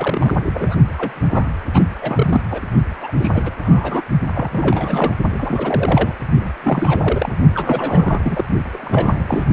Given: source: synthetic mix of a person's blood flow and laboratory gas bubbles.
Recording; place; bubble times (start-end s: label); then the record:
Doppler ultrasound of blood flow; precordium
0.00-0.38 s: bubbles
0.45-0.76 s: bubbles
0.97-1.49 s: bubbles
1.73-1.83 s: bubbles
2.01-2.42 s: bubbles
2.50-2.61 s: bubbles
3.00-3.11 s: bubbles
3.17-3.31 s: bubbles
3.33-3.56 s: bubbles
3.65-4.02 s: bubbles
4.34-5.13 s: bubbles
5.31-6.13 s: bubbles
6.41-6.51 s: bubbles
6.63-7.32 s: bubbles
7.54-8.45 s: bubbles
8.73-9.47 s: bubbles
From the record:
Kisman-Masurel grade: 342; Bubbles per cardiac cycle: rolling drumbeat, 9 or more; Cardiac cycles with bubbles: 100%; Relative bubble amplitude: moderate (0.250 to 0.450); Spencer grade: 3 (all of the cardiac periods contain showers or single bubble signals, but not dominating or overriding the cardiac motion signals); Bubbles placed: only in the low amplitude regions of the cardiac cycle